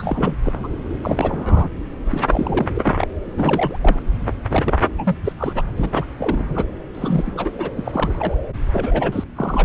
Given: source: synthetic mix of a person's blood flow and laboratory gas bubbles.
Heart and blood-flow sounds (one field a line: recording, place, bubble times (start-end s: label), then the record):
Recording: Doppler ultrasound of blood flow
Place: subclavian vein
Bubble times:
0.00-0.35 s: bubbles
0.43-0.53 s: bubbles
0.64-0.68 s: bubbles
1.01-1.69 s: bubbles
2.09-2.82 s: bubbles
2.85-3.07 s: bubbles
3.25-3.77 s: bubbles
3.81-4.00 s: bubbles
4.50-4.77 s: bubbles
4.97-5.16 s: bubbles
5.25-5.33 s: bubbles
5.38-5.62 s: bubbles
5.77-6.05 s: bubbles
6.18-6.67 s: bubbles
6.94-7.33 s: bubbles
7.35-7.51 s: bubbles
7.59-7.69 s: bubbles
7.77-8.38 s: bubbles
8.72-9.24 s: bubbles
9.36-9.65 s: bubbles
From the record:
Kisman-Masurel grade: 342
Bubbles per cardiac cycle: rolling drumbeat, 9 or more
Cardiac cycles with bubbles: 100%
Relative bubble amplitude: moderate (0.250 to 0.450)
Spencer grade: 3 (all of the cardiac periods contain showers or single bubble signals, but not dominating or overriding the cardiac motion signals)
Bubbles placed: anywhere in the cardiac cycle